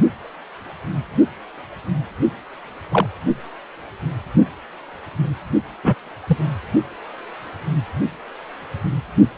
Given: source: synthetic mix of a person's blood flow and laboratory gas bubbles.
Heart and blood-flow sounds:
Doppler ultrasound of blood flow; precordium
2.91-3.06 s: bubbles
5.83-5.95 s: bubbles
6.26-6.37 s: bubbles
From the record:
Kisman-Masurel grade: 123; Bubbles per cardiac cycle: 1 to 2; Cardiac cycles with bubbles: 10 to 50%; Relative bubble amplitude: loud (0.450 to 0.775); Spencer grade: 2 (many but less than half of the cardiac periods contain bubble signals, singularly or in groups); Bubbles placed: only in the low amplitude regions of the cardiac cycle

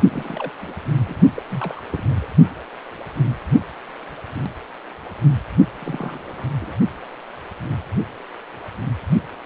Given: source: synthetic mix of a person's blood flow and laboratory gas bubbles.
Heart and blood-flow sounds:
Doppler ultrasound of blood flow; precordium
0.08-0.53 s: bubbles
0.61-0.73 s: bubbles
1.01-1.19 s: bubbles
1.34-1.43 s: bubbles
1.50-1.80 s: bubbles
1.90-2.14 s: bubbles
2.21-2.27 s: bubbles
5.79-6.44 s: bubbles
6.60-6.75 s: bubbles
From the record:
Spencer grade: 2 (many but less than half of the cardiac periods contain bubble signals, singularly or in groups); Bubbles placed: only in the low amplitude regions of the cardiac cycle

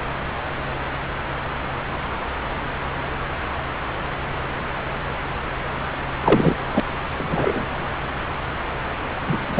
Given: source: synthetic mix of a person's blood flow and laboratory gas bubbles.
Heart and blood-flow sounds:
Doppler ultrasound of blood flow; subclavian vein
6.24-6.56 s: bubbles
6.72-6.80 s: bubbles
7.17-7.65 s: bubbles
9.27-9.41 s: bubbles
9.48-9.60 s: bubbles
From the record:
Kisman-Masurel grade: 223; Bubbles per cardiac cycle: several, 3 to 8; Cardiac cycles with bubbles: 10 to 50%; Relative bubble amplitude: loud (0.450 to 0.775); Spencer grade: 2 (many but less than half of the cardiac periods contain bubble signals, singularly or in groups); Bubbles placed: anywhere in the cardiac cycle

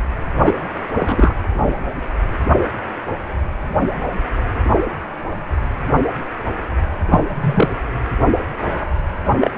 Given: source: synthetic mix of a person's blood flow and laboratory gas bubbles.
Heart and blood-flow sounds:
Doppler ultrasound of blood flow; precordium
0.39-0.52 s: bubbles
0.95-1.34 s: bubbles
7.11-7.19 s: bubbles
7.40-7.72 s: bubbles
9.41-9.51 s: bubbles
From the record:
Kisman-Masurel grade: 123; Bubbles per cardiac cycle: 1 to 2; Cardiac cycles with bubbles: 10 to 50%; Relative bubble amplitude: loud (0.450 to 0.775); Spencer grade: 2 (many but less than half of the cardiac periods contain bubble signals, singularly or in groups); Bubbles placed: anywhere in the cardiac cycle

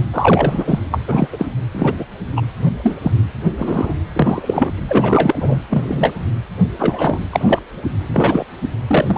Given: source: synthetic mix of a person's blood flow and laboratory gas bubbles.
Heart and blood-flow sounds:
Doppler ultrasound of blood flow; precordium
0.13-0.80 s: bubbles
0.91-0.98 s: bubbles
1.08-1.27 s: bubbles
1.32-1.46 s: bubbles
1.73-1.95 s: bubbles
1.98-2.04 s: bubbles
2.36-2.42 s: bubbles
2.65-2.72 s: bubbles
2.83-2.96 s: bubbles
3.01-3.12 s: bubbles
3.58-3.94 s: bubbles
4.13-4.72 s: bubbles
4.88-5.38 s: bubbles
5.40-5.56 s: bubbles
5.70-6.19 s: bubbles
6.78-7.19 s: bubbles
7.31-7.59 s: bubbles
8.12-8.45 s: bubbles
8.87-9.18 s: bubbles
From the record:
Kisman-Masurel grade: 243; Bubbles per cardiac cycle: several, 3 to 8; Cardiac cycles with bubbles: 100%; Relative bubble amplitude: loud (0.450 to 0.775); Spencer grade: 3 (all of the cardiac periods contain showers or single bubble signals, but not dominating or overriding the cardiac motion signals); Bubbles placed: anywhere in the cardiac cycle

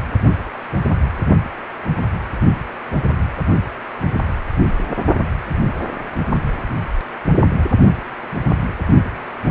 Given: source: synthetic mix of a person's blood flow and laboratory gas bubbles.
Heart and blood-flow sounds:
Doppler ultrasound of blood flow; precordium
no bubbles
From the record:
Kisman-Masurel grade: 000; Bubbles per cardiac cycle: 0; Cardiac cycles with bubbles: 0%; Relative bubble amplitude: no bubbles discernible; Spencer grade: 0 (complete lack of bubble signals)

